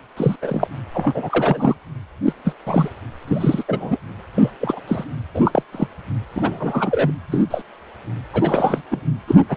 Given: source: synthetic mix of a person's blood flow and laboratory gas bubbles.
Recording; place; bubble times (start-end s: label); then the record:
Doppler ultrasound of blood flow; precordium
0.17-0.36 s: bubbles
0.42-0.68 s: bubbles
0.93-1.75 s: bubbles
2.27-2.33 s: bubbles
2.45-2.54 s: bubbles
2.67-2.89 s: bubbles
3.28-3.64 s: bubbles
3.68-3.98 s: bubbles
4.34-4.52 s: bubbles
4.61-4.80 s: bubbles
4.88-5.04 s: bubbles
5.34-5.62 s: bubbles
5.72-5.87 s: bubbles
6.35-7.12 s: bubbles
7.32-7.44 s: bubbles
7.50-7.62 s: bubbles
8.32-8.82 s: bubbles
8.90-9.01 s: bubbles
9.28-9.35 s: bubbles
9.48-9.56 s: bubbles
From the record:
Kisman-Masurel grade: 242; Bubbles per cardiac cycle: several, 3 to 8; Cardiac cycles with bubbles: 100%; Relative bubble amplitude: moderate (0.250 to 0.450); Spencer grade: 3 (all of the cardiac periods contain showers or single bubble signals, but not dominating or overriding the cardiac motion signals); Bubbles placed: anywhere in the cardiac cycle